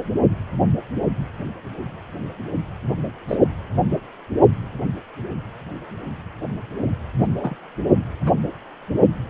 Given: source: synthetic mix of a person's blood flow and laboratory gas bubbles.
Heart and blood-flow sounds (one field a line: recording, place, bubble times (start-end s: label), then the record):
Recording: Doppler ultrasound of blood flow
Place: precordium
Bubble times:
3.27-3.38 s: bubbles
7.19-7.28 s: bubbles
7.30-7.34 s: bubbles
7.38-7.58 s: bubbles
7.61-7.66 s: bubbles
8.25-8.32 s: bubbles
From the record:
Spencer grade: 2 (many but less than half of the cardiac periods contain bubble signals, singularly or in groups)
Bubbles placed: only in the low amplitude regions of the cardiac cycle